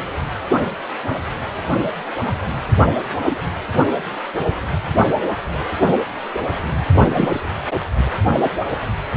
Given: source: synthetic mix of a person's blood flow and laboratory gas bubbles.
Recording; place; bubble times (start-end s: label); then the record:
Doppler ultrasound of blood flow; precordium
3.26-3.36 s: bubbles
7.09-7.41 s: bubbles
From the record:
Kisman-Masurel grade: 122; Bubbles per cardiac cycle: 1 to 2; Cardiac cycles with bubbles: 10 to 50%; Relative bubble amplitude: moderate (0.250 to 0.450); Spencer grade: 2 (many but less than half of the cardiac periods contain bubble signals, singularly or in groups); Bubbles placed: only in the low amplitude regions of the cardiac cycle